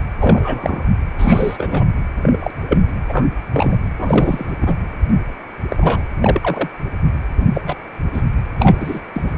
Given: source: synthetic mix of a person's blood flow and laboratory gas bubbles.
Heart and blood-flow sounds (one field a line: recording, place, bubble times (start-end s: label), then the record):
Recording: Doppler ultrasound of blood flow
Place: precordium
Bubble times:
0.00-0.04 s: bubbles
0.19-0.84 s: bubbles
1.18-1.86 s: bubbles
2.22-2.50 s: bubbles
2.68-2.81 s: bubbles
3.08-3.29 s: bubbles
3.53-3.76 s: bubbles
3.98-4.52 s: bubbles
4.61-4.74 s: bubbles
5.68-6.02 s: bubbles
6.22-6.39 s: bubbles
6.42-6.68 s: bubbles
7.54-7.61 s: bubbles
7.66-7.75 s: bubbles
8.14-8.22 s: bubbles
8.59-9.01 s: bubbles
9.14-9.35 s: bubbles
From the record:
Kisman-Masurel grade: 243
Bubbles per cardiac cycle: several, 3 to 8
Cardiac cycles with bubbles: 100%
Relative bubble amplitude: loud (0.450 to 0.775)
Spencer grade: 3 (all of the cardiac periods contain showers or single bubble signals, but not dominating or overriding the cardiac motion signals)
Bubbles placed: anywhere in the cardiac cycle